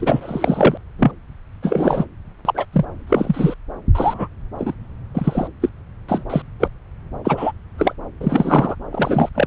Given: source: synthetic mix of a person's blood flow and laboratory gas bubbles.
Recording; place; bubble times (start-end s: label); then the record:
Doppler ultrasound of blood flow; subclavian vein
0.00-0.78 s: bubbles
0.99-1.11 s: bubbles
1.62-2.05 s: bubbles
2.45-2.65 s: bubbles
2.72-2.85 s: bubbles
3.07-3.54 s: bubbles
3.95-4.28 s: bubbles
4.58-4.75 s: bubbles
5.14-5.48 s: bubbles
5.61-5.69 s: bubbles
6.08-6.24 s: bubbles
6.29-6.42 s: bubbles
6.59-6.69 s: bubbles
7.24-7.52 s: bubbles
7.78-7.93 s: bubbles
8.21-8.75 s: bubbles
8.90-9.29 s: bubbles
9.34-9.46 s: bubbles
From the record:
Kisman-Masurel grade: 243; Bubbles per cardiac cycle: several, 3 to 8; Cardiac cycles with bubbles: 100%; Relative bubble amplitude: loud (0.450 to 0.775); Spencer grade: 3 (all of the cardiac periods contain showers or single bubble signals, but not dominating or overriding the cardiac motion signals); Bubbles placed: anywhere in the cardiac cycle